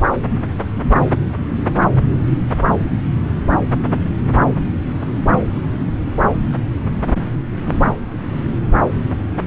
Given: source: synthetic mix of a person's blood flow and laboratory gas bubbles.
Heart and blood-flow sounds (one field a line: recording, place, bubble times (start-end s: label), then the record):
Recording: Doppler ultrasound of blood flow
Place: subclavian vein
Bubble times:
no bubbles
From the record:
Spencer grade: 0 (complete lack of bubble signals)